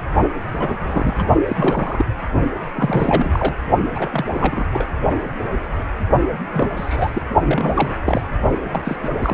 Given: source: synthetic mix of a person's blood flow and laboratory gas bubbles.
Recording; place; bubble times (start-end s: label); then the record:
Doppler ultrasound of blood flow; precordium
0.52-1.15 s: bubbles
1.18-1.25 s: bubbles
1.48-2.05 s: bubbles
2.75-3.55 s: bubbles
3.94-4.10 s: bubbles
4.12-4.25 s: bubbles
4.29-4.68 s: bubbles
4.73-4.86 s: bubbles
6.52-6.71 s: bubbles
6.76-7.23 s: bubbles
7.44-7.95 s: bubbles
8.05-8.22 s: bubbles
8.72-8.97 s: bubbles
9.02-9.09 s: bubbles
9.22-9.34 s: bubbles
From the record:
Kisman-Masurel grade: 242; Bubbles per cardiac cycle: several, 3 to 8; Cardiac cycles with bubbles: 100%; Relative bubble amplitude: moderate (0.250 to 0.450); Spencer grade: 3 (all of the cardiac periods contain showers or single bubble signals, but not dominating or overriding the cardiac motion signals); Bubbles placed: only in the low amplitude regions of the cardiac cycle